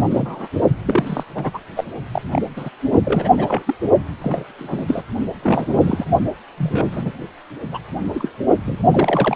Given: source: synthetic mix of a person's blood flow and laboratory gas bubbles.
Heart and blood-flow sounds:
Doppler ultrasound of blood flow; precordium
0.00-0.47 s: bubbles
0.85-1.23 s: bubbles
1.35-1.51 s: bubbles
1.54-1.59 s: bubbles
1.77-1.84 s: bubbles
2.12-2.22 s: bubbles
2.33-2.42 s: bubbles
2.56-2.70 s: bubbles
3.04-3.33 s: bubbles
3.37-3.63 s: bubbles
3.67-3.75 s: bubbles
4.21-4.52 s: bubbles
4.58-4.84 s: bubbles
4.87-5.02 s: bubbles
5.42-6.05 s: bubbles
6.57-7.11 s: bubbles
7.72-7.79 s: bubbles
8.14-8.30 s: bubbles
8.64-8.80 s: bubbles
8.91-9.36 s: bubbles
From the record:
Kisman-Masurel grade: 242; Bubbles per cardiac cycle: several, 3 to 8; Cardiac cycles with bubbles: 100%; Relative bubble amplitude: moderate (0.250 to 0.450); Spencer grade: 3 (all of the cardiac periods contain showers or single bubble signals, but not dominating or overriding the cardiac motion signals); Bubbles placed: only in the low amplitude regions of the cardiac cycle

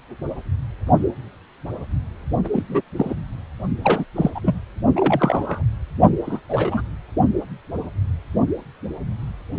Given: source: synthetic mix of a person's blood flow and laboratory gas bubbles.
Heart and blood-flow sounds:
Doppler ultrasound of blood flow; precordium
2.44-2.48 s: bubbles
2.52-2.63 s: bubbles
2.69-2.81 s: bubbles
2.96-3.15 s: bubbles
3.83-4.05 s: bubbles
4.16-4.30 s: bubbles
4.34-4.40 s: bubbles
4.42-4.60 s: bubbles
4.96-5.63 s: bubbles
6.25-6.41 s: bubbles
6.49-6.82 s: bubbles
From the record:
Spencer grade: 3 (all of the cardiac periods contain showers or single bubble signals, but not dominating or overriding the cardiac motion signals); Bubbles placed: only in the low amplitude regions of the cardiac cycle

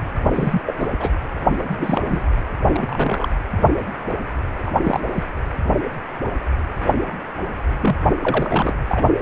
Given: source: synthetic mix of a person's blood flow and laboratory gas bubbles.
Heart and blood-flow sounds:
Doppler ultrasound of blood flow; precordium
0.33-0.61 s: bubbles
0.65-0.75 s: bubbles
0.79-0.87 s: bubbles
1.00-1.09 s: bubbles
1.69-2.27 s: bubbles
2.68-3.35 s: bubbles
4.66-4.71 s: bubbles
4.83-5.01 s: bubbles
5.14-5.23 s: bubbles
7.80-7.96 s: bubbles
8.21-8.75 s: bubbles
8.88-9.10 s: bubbles
From the record:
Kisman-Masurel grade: 232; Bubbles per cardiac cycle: several, 3 to 8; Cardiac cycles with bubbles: 50 to 99%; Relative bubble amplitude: moderate (0.250 to 0.450); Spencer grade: 3 (all of the cardiac periods contain showers or single bubble signals, but not dominating or overriding the cardiac motion signals); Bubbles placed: anywhere in the cardiac cycle

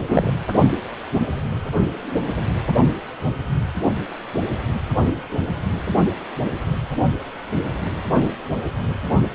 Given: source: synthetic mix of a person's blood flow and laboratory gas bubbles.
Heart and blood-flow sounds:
Doppler ultrasound of blood flow; precordium
0.00-0.03 s: bubbles
0.09-0.34 s: bubbles
From the record:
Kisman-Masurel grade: 213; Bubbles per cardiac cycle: several, 3 to 8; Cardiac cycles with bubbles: 1 to 10%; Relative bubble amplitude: loud (0.450 to 0.775); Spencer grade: 1 (occasional bubble signal discernible with the cardiac motion signal, with majority of cardiac periods free of bubbles); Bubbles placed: anywhere in the cardiac cycle

